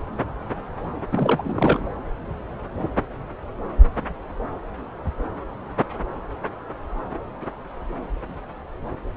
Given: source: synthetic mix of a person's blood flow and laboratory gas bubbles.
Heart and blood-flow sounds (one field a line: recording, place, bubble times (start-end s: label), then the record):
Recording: Doppler ultrasound of blood flow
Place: subclavian vein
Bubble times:
1.11-1.88 s: bubbles
From the record:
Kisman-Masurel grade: 212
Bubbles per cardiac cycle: several, 3 to 8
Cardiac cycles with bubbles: 1 to 10%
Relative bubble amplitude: moderate (0.250 to 0.450)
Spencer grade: 1 (occasional bubble signal discernible with the cardiac motion signal, with majority of cardiac periods free of bubbles)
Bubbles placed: anywhere in the cardiac cycle